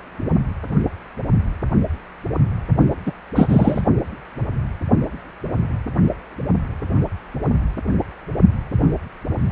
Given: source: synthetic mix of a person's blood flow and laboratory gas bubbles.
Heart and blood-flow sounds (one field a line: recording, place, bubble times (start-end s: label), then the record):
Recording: Doppler ultrasound of blood flow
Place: precordium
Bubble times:
3.06-3.11 s: bubbles
3.35-3.81 s: bubbles
From the record:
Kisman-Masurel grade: 223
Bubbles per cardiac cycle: several, 3 to 8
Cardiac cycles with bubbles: 10 to 50%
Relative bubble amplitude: loud (0.450 to 0.775)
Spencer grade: 2 (many but less than half of the cardiac periods contain bubble signals, singularly or in groups)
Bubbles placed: only in the low amplitude regions of the cardiac cycle